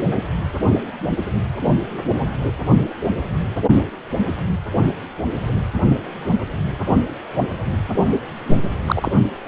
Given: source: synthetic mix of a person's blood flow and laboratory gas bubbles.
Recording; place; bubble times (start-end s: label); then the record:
Doppler ultrasound of blood flow; precordium
8.45-8.56 s: bubbles
8.86-9.12 s: bubbles
From the record:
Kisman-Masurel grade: 123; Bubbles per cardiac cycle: 1 to 2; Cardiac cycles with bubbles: 10 to 50%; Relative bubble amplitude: loud (0.450 to 0.775); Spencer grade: 2 (many but less than half of the cardiac periods contain bubble signals, singularly or in groups); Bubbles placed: only in the low amplitude regions of the cardiac cycle